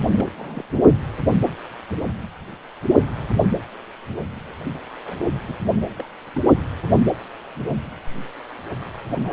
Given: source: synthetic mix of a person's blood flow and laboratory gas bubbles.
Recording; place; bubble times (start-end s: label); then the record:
Doppler ultrasound of blood flow; precordium
0.12-0.31 s: bubbles
0.37-0.64 s: bubbles
0.71-0.79 s: bubbles
0.82-0.93 s: bubbles
5.05-5.15 s: bubbles
5.46-5.58 s: bubbles
5.97-6.06 s: bubbles
6.34-6.42 s: bubbles
9.15-9.32 s: bubbles
From the record:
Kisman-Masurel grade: 221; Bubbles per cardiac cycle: several, 3 to 8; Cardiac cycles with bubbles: 10 to 50%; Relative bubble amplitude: barely perceptible (0.100 to 0.250); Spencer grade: 2 (many but less than half of the cardiac periods contain bubble signals, singularly or in groups); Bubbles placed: anywhere in the cardiac cycle